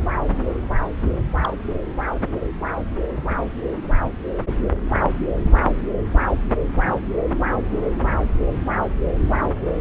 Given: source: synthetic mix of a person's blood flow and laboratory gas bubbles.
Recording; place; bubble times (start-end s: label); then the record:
Doppler ultrasound of blood flow; subclavian vein
1.41-1.53 s: bubbles
5.33-5.51 s: bubbles
From the record:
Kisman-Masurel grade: 111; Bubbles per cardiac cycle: 1 to 2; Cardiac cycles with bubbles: 1 to 10%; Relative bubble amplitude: barely perceptible (0.100 to 0.250); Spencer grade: 1 (occasional bubble signal discernible with the cardiac motion signal, with majority of cardiac periods free of bubbles); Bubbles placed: anywhere in the cardiac cycle